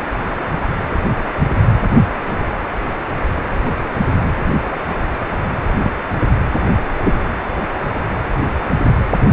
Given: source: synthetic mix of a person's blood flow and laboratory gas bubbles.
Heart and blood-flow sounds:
Doppler ultrasound of blood flow; precordium
5.83-5.90 s: bubbles
7.03-7.17 s: bubbles
From the record:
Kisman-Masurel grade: 122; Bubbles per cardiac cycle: 1 to 2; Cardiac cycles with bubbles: 10 to 50%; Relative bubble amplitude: moderate (0.250 to 0.450); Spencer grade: 2 (many but less than half of the cardiac periods contain bubble signals, singularly or in groups); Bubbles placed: anywhere in the cardiac cycle

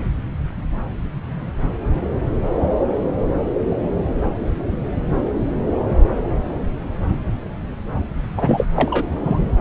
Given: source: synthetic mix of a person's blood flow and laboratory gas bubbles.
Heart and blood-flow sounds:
Doppler ultrasound of blood flow; subclavian vein
8.37-8.68 s: bubbles
8.76-9.04 s: bubbles
9.23-9.51 s: bubbles
From the record:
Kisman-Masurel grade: 213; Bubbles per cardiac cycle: several, 3 to 8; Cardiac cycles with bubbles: 1 to 10%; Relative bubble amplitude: loud (0.450 to 0.775); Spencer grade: 1 (occasional bubble signal discernible with the cardiac motion signal, with majority of cardiac periods free of bubbles); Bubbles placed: anywhere in the cardiac cycle

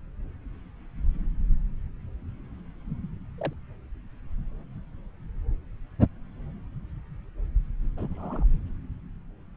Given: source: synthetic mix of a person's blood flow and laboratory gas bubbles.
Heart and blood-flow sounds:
Doppler ultrasound of blood flow; subclavian vein
3.38-3.54 s: bubbles
7.97-8.45 s: bubbles
From the record:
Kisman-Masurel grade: 121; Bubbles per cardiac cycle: 1 to 2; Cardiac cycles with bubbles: 10 to 50%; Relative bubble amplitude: barely perceptible (0.100 to 0.250); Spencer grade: 2 (many but less than half of the cardiac periods contain bubble signals, singularly or in groups); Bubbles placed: anywhere in the cardiac cycle

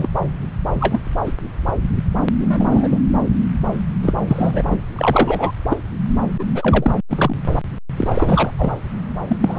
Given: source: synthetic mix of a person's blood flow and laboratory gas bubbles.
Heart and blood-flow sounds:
Doppler ultrasound of blood flow; subclavian vein
0.00-0.10 s: bubbles
0.80-1.01 s: bubbles
1.26-1.33 s: bubbles
2.38-2.99 s: bubbles
4.02-4.13 s: bubbles
4.27-4.63 s: bubbles
4.70-4.78 s: bubbles
4.95-5.51 s: bubbles
5.70-5.76 s: bubbles
6.38-6.45 s: bubbles
6.54-6.91 s: bubbles
7.09-7.36 s: bubbles
7.97-8.50 s: bubbles
8.58-8.73 s: bubbles
9.28-9.38 s: bubbles
9.40-9.59 s: bubbles
From the record:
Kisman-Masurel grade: 243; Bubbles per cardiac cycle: several, 3 to 8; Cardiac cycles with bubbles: 100%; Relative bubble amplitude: loud (0.450 to 0.775); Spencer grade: 3 (all of the cardiac periods contain showers or single bubble signals, but not dominating or overriding the cardiac motion signals); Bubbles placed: anywhere in the cardiac cycle

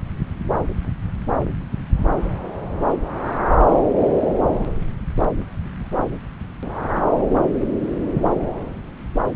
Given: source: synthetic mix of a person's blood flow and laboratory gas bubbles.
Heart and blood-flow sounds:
Doppler ultrasound of blood flow; subclavian vein
no bubbles
From the record:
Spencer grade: 0 (complete lack of bubble signals)

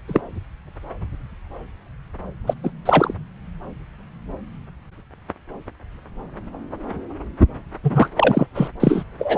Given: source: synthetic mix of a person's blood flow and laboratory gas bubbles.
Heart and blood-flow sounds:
Doppler ultrasound of blood flow; subclavian vein
0.08-0.21 s: bubbles
2.46-2.54 s: bubbles
2.63-2.71 s: bubbles
2.85-3.14 s: bubbles
7.84-8.08 s: bubbles
8.15-8.46 s: bubbles
8.54-8.68 s: bubbles
8.79-9.04 s: bubbles
9.19-9.38 s: bubbles
From the record:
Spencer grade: 2 (many but less than half of the cardiac periods contain bubble signals, singularly or in groups); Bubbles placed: anywhere in the cardiac cycle

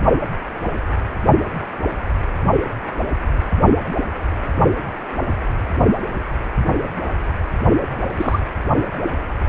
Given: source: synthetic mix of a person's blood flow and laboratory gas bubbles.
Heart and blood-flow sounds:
Doppler ultrasound of blood flow; precordium
8.18-8.39 s: bubbles
From the record:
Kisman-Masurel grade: 112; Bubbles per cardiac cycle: 1 to 2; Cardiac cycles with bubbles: 1 to 10%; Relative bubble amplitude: moderate (0.250 to 0.450); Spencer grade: 1 (occasional bubble signal discernible with the cardiac motion signal, with majority of cardiac periods free of bubbles); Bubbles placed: only in the low amplitude regions of the cardiac cycle

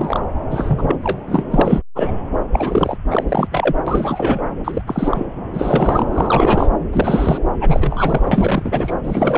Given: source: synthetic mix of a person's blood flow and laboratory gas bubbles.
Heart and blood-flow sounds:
Doppler ultrasound of blood flow; subclavian vein
0.00-0.20 s: bubbles
0.50-0.98 s: bubbles
1.02-1.43 s: bubbles
1.50-1.81 s: bubbles
1.95-2.11 s: bubbles
2.52-2.97 s: bubbles
3.10-3.24 s: bubbles
3.29-3.48 s: bubbles
3.51-3.74 s: bubbles
3.87-4.43 s: bubbles
4.64-4.82 s: bubbles
4.87-5.26 s: bubbles
5.53-6.05 s: bubbles
6.11-6.69 s: bubbles
6.92-7.39 s: bubbles
7.58-8.92 s: bubbles
9.03-9.38 s: bubbles
From the record:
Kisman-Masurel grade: 343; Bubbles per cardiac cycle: rolling drumbeat, 9 or more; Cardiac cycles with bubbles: 100%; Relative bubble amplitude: loud (0.450 to 0.775); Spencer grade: 3 (all of the cardiac periods contain showers or single bubble signals, but not dominating or overriding the cardiac motion signals); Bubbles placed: anywhere in the cardiac cycle

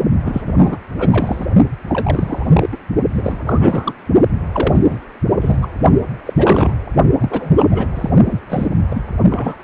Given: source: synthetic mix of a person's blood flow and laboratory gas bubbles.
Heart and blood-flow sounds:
Doppler ultrasound of blood flow; precordium
0.24-0.42 s: bubbles
0.46-0.55 s: bubbles
0.58-0.77 s: bubbles
0.98-1.45 s: bubbles
1.89-2.69 s: bubbles
2.72-2.77 s: bubbles
3.16-3.44 s: bubbles
3.46-3.93 s: bubbles
4.52-4.99 s: bubbles
5.40-5.58 s: bubbles
5.61-5.67 s: bubbles
6.25-6.74 s: bubbles
7.20-7.87 s: bubbles
7.94-8.10 s: bubbles
8.27-8.40 s: bubbles
8.49-8.67 s: bubbles
8.88-9.01 s: bubbles
9.29-9.57 s: bubbles
From the record:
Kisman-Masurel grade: 343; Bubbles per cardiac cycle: rolling drumbeat, 9 or more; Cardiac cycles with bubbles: 100%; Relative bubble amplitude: loud (0.450 to 0.775); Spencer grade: 3 (all of the cardiac periods contain showers or single bubble signals, but not dominating or overriding the cardiac motion signals); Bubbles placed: only in the low amplitude regions of the cardiac cycle

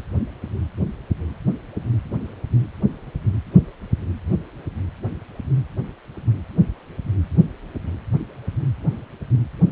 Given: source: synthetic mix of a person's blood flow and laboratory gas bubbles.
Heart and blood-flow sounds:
Doppler ultrasound of blood flow; precordium
no bubbles
From the record:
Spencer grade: 0 (complete lack of bubble signals)

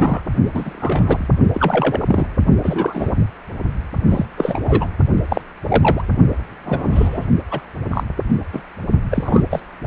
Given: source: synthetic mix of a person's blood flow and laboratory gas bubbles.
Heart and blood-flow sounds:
Doppler ultrasound of blood flow; precordium
0.00-0.21 s: bubbles
0.54-1.27 s: bubbles
1.54-2.04 s: bubbles
2.08-2.27 s: bubbles
2.63-3.14 s: bubbles
4.07-4.26 s: bubbles
4.38-4.88 s: bubbles
5.29-5.41 s: bubbles
5.63-6.02 s: bubbles
6.66-7.27 s: bubbles
7.51-7.61 s: bubbles
7.91-8.04 s: bubbles
8.53-8.62 s: bubbles
9.11-9.43 s: bubbles
9.50-9.60 s: bubbles
From the record:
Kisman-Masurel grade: 242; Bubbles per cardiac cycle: several, 3 to 8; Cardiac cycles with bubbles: 100%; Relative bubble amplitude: moderate (0.250 to 0.450); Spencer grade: 3 (all of the cardiac periods contain showers or single bubble signals, but not dominating or overriding the cardiac motion signals); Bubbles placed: only in the low amplitude regions of the cardiac cycle

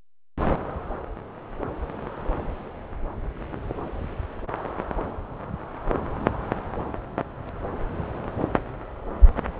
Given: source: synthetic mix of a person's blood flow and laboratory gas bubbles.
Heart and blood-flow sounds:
Doppler ultrasound of blood flow; subclavian vein
no bubbles
From the record:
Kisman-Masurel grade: 000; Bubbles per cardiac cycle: 0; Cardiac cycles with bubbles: 0%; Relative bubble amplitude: no bubbles discernible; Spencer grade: 0 (complete lack of bubble signals)

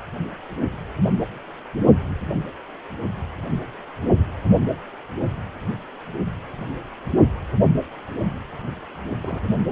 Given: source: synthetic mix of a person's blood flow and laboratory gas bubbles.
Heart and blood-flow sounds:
Doppler ultrasound of blood flow; precordium
9.22-9.53 s: bubbles
From the record:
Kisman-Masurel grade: 211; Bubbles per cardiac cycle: several, 3 to 8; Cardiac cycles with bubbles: 1 to 10%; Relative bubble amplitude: barely perceptible (0.100 to 0.250); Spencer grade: 1 (occasional bubble signal discernible with the cardiac motion signal, with majority of cardiac periods free of bubbles); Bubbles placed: only in the low amplitude regions of the cardiac cycle

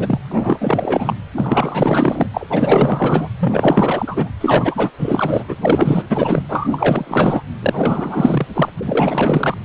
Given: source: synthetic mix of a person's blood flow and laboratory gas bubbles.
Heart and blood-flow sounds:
Doppler ultrasound of blood flow; precordium
0.00-0.19 s: bubbles
0.31-1.14 s: bubbles
1.34-2.27 s: bubbles
2.33-2.47 s: bubbles
2.50-3.28 s: bubbles
3.39-4.29 s: bubbles
4.41-4.91 s: bubbles
4.98-5.44 s: bubbles
5.48-5.56 s: bubbles
5.61-6.03 s: bubbles
6.09-6.43 s: bubbles
6.49-6.68 s: bubbles
6.71-7.42 s: bubbles
7.62-8.46 s: bubbles
8.54-8.70 s: bubbles
8.78-9.57 s: bubbles
From the record:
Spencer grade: 4 (maximum detectable bubble signal sounding continuously throughout systole and diastole of every cardiac period, and overriding the amplitude of the normal cardiac signals); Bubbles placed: anywhere in the cardiac cycle

